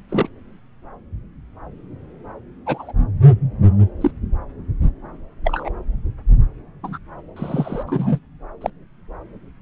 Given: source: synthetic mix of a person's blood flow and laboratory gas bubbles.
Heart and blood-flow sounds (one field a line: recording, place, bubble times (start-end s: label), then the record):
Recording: Doppler ultrasound of blood flow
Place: subclavian vein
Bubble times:
0.09-0.28 s: bubbles
2.66-2.92 s: bubbles
4.00-4.11 s: bubbles
5.44-5.69 s: bubbles
6.83-6.98 s: bubbles
7.36-7.83 s: bubbles
7.87-8.20 s: bubbles
8.61-8.70 s: bubbles
From the record:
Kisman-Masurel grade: 122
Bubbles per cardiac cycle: 1 to 2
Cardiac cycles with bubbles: 10 to 50%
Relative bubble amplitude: moderate (0.250 to 0.450)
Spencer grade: 2 (many but less than half of the cardiac periods contain bubble signals, singularly or in groups)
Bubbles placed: anywhere in the cardiac cycle